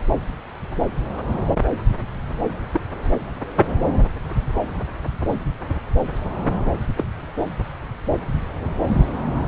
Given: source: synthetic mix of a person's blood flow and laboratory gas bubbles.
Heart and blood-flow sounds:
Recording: Doppler ultrasound of blood flow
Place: subclavian vein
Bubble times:
2.71-2.81 s: bubbles
6.96-7.05 s: bubbles
From the record:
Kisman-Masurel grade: 122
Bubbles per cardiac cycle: 1 to 2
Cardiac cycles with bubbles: 10 to 50%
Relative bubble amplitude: moderate (0.250 to 0.450)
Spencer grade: 2 (many but less than half of the cardiac periods contain bubble signals, singularly or in groups)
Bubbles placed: anywhere in the cardiac cycle

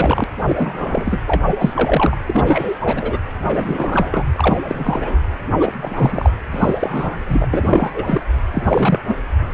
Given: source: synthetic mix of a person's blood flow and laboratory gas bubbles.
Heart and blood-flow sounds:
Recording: Doppler ultrasound of blood flow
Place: precordium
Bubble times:
0.00-0.24 s: bubbles
0.36-1.20 s: bubbles
1.27-1.42 s: bubbles
1.46-2.18 s: bubbles
2.27-2.79 s: bubbles
2.85-3.19 s: bubbles
3.47-4.26 s: bubbles
4.36-4.59 s: bubbles
4.63-5.17 s: bubbles
5.59-5.73 s: bubbles
5.80-6.32 s: bubbles
6.50-7.17 s: bubbles
7.28-7.47 s: bubbles
7.53-7.92 s: bubbles
7.94-8.23 s: bubbles
8.50-9.00 s: bubbles
9.07-9.16 s: bubbles
From the record:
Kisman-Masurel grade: 343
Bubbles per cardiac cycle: rolling drumbeat, 9 or more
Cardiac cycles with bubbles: 100%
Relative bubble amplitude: loud (0.450 to 0.775)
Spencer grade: 3 (all of the cardiac periods contain showers or single bubble signals, but not dominating or overriding the cardiac motion signals)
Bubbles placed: anywhere in the cardiac cycle

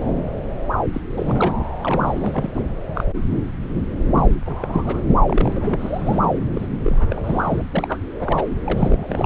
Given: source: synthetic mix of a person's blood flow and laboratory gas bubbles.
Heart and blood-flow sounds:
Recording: Doppler ultrasound of blood flow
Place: subclavian vein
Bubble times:
0.93-1.01 s: bubbles
1.15-1.65 s: bubbles
1.81-2.65 s: bubbles
2.95-3.04 s: bubbles
4.14-4.36 s: bubbles
4.45-5.01 s: bubbles
5.28-6.19 s: bubbles
6.21-6.40 s: bubbles
6.54-6.67 s: bubbles
6.83-7.20 s: bubbles
7.24-7.64 s: bubbles
7.71-8.00 s: bubbles
8.19-8.48 s: bubbles
8.64-9.26 s: bubbles
From the record:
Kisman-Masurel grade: 332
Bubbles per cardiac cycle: rolling drumbeat, 9 or more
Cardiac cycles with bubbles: 50 to 99%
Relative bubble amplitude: moderate (0.250 to 0.450)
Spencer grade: 3 (all of the cardiac periods contain showers or single bubble signals, but not dominating or overriding the cardiac motion signals)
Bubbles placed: anywhere in the cardiac cycle

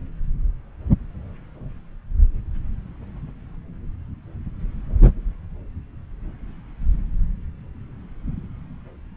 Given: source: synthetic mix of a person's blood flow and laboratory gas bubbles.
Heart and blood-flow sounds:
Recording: Doppler ultrasound of blood flow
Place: subclavian vein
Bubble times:
no bubbles
From the record:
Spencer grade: 0 (complete lack of bubble signals)

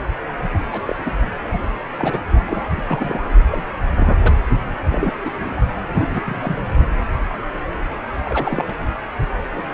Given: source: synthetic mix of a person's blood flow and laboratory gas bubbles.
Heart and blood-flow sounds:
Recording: Doppler ultrasound of blood flow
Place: precordium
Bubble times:
0.71-0.81 s: bubbles
0.85-0.95 s: bubbles
1.05-1.11 s: bubbles
1.45-1.60 s: bubbles
1.96-2.21 s: bubbles
2.48-2.68 s: bubbles
2.71-2.83 s: bubbles
2.85-3.27 s: bubbles
3.50-3.66 s: bubbles
3.96-4.13 s: bubbles
4.23-4.35 s: bubbles
4.90-5.12 s: bubbles
5.25-5.31 s: bubbles
5.40-5.56 s: bubbles
5.94-6.07 s: bubbles
6.14-6.23 s: bubbles
6.26-6.58 s: bubbles
8.25-8.64 s: bubbles
8.68-8.74 s: bubbles
9.55-9.65 s: bubbles
From the record:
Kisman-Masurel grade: 242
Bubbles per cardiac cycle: several, 3 to 8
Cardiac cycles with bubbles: 100%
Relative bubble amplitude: moderate (0.250 to 0.450)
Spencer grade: 3 (all of the cardiac periods contain showers or single bubble signals, but not dominating or overriding the cardiac motion signals)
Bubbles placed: only in the low amplitude regions of the cardiac cycle

